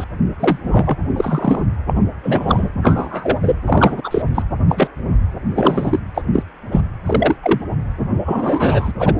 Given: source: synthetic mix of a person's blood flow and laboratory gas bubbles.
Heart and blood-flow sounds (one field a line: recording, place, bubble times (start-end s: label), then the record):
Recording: Doppler ultrasound of blood flow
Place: precordium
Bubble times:
0.00-0.04 s: bubbles
0.40-0.58 s: bubbles
0.63-0.96 s: bubbles
1.16-1.67 s: bubbles
1.86-1.94 s: bubbles
2.23-2.69 s: bubbles
2.82-3.37 s: bubbles
3.42-3.55 s: bubbles
3.66-4.01 s: bubbles
4.04-4.22 s: bubbles
4.34-4.42 s: bubbles
4.69-4.88 s: bubbles
5.54-5.99 s: bubbles
6.14-6.22 s: bubbles
6.33-6.43 s: bubbles
6.71-6.81 s: bubbles
7.06-7.36 s: bubbles
7.43-7.59 s: bubbles
8.25-8.92 s: bubbles
8.99-9.14 s: bubbles
From the record:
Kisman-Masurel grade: 243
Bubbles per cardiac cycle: several, 3 to 8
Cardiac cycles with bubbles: 100%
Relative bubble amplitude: loud (0.450 to 0.775)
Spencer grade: 3 (all of the cardiac periods contain showers or single bubble signals, but not dominating or overriding the cardiac motion signals)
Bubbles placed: anywhere in the cardiac cycle